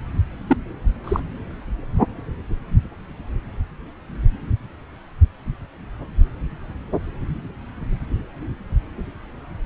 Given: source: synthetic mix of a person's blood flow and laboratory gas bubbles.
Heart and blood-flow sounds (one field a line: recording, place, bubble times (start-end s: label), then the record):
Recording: Doppler ultrasound of blood flow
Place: subclavian vein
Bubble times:
0.47-0.57 s: bubbles
1.04-1.20 s: bubbles
From the record:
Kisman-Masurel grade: 122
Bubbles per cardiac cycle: 1 to 2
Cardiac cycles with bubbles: 10 to 50%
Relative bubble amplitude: moderate (0.250 to 0.450)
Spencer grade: 2 (many but less than half of the cardiac periods contain bubble signals, singularly or in groups)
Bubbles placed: anywhere in the cardiac cycle